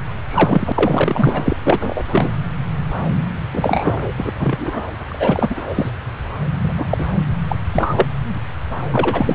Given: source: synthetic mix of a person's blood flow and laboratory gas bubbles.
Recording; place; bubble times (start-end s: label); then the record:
Doppler ultrasound of blood flow; subclavian vein
0.27-0.72 s: bubbles
0.75-1.56 s: bubbles
1.64-2.02 s: bubbles
2.12-2.29 s: bubbles
3.53-4.12 s: bubbles
4.17-4.32 s: bubbles
4.39-4.81 s: bubbles
5.08-5.90 s: bubbles
6.63-6.73 s: bubbles
6.77-6.86 s: bubbles
6.89-7.05 s: bubbles
7.48-7.56 s: bubbles
7.74-8.05 s: bubbles
8.92-9.35 s: bubbles
From the record:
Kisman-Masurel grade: 233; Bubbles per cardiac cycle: several, 3 to 8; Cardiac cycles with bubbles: 50 to 99%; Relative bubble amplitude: loud (0.450 to 0.775); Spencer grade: 3 (all of the cardiac periods contain showers or single bubble signals, but not dominating or overriding the cardiac motion signals); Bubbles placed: anywhere in the cardiac cycle